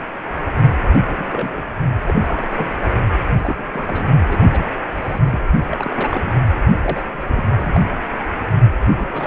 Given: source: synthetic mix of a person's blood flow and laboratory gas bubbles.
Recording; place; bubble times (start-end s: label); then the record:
Doppler ultrasound of blood flow; precordium
1.08-1.64 s: bubbles
2.06-2.70 s: bubbles
3.38-3.63 s: bubbles
3.74-4.04 s: bubbles
4.28-4.65 s: bubbles
4.94-5.39 s: bubbles
5.71-6.37 s: bubbles
6.81-7.04 s: bubbles
7.29-7.42 s: bubbles
7.56-7.80 s: bubbles
8.88-9.06 s: bubbles
9.12-9.27 s: bubbles
From the record:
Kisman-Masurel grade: 232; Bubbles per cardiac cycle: several, 3 to 8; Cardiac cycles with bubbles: 50 to 99%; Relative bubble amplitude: moderate (0.250 to 0.450); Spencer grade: 3 (all of the cardiac periods contain showers or single bubble signals, but not dominating or overriding the cardiac motion signals); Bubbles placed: only in the low amplitude regions of the cardiac cycle